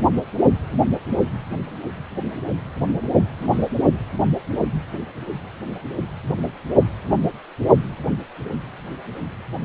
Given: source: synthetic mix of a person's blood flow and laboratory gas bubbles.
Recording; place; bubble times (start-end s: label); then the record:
Doppler ultrasound of blood flow; precordium
3.38-3.69 s: bubbles
From the record:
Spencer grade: 1 (occasional bubble signal discernible with the cardiac motion signal, with majority of cardiac periods free of bubbles); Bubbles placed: only in the low amplitude regions of the cardiac cycle